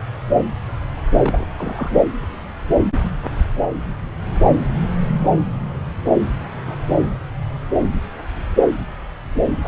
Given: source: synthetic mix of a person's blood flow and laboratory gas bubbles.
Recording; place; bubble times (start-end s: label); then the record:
Doppler ultrasound of blood flow; subclavian vein
1.22-1.47 s: bubbles
1.57-2.02 s: bubbles
2.22-2.47 s: bubbles
6.67-6.75 s: bubbles
From the record:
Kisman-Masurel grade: 121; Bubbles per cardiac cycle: 1 to 2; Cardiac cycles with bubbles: 10 to 50%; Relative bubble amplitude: barely perceptible (0.100 to 0.250); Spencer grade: 2 (many but less than half of the cardiac periods contain bubble signals, singularly or in groups); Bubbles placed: anywhere in the cardiac cycle